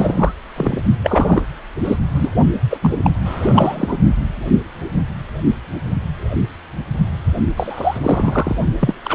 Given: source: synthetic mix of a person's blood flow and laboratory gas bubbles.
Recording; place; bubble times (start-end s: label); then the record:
Doppler ultrasound of blood flow; precordium
0.00-0.32 s: bubbles
0.56-0.82 s: bubbles
1.03-1.43 s: bubbles
1.84-1.96 s: bubbles
2.12-2.29 s: bubbles
2.70-2.94 s: bubbles
3.04-3.10 s: bubbles
3.25-3.96 s: bubbles
7.57-8.00 s: bubbles
8.02-8.56 s: bubbles
8.80-8.93 s: bubbles
9.04-9.15 s: bubbles
From the record:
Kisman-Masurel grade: 233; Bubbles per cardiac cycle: several, 3 to 8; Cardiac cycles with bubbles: 50 to 99%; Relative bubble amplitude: loud (0.450 to 0.775); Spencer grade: 3 (all of the cardiac periods contain showers or single bubble signals, but not dominating or overriding the cardiac motion signals); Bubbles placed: only in the low amplitude regions of the cardiac cycle